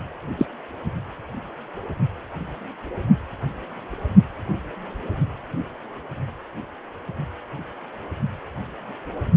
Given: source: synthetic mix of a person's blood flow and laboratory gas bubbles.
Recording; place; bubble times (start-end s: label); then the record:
Doppler ultrasound of blood flow; precordium
0.38-0.46 s: bubbles
From the record:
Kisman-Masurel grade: 113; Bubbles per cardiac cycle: 1 to 2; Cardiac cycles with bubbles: 1 to 10%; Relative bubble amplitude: loud (0.450 to 0.775); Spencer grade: 1 (occasional bubble signal discernible with the cardiac motion signal, with majority of cardiac periods free of bubbles); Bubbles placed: only in the low amplitude regions of the cardiac cycle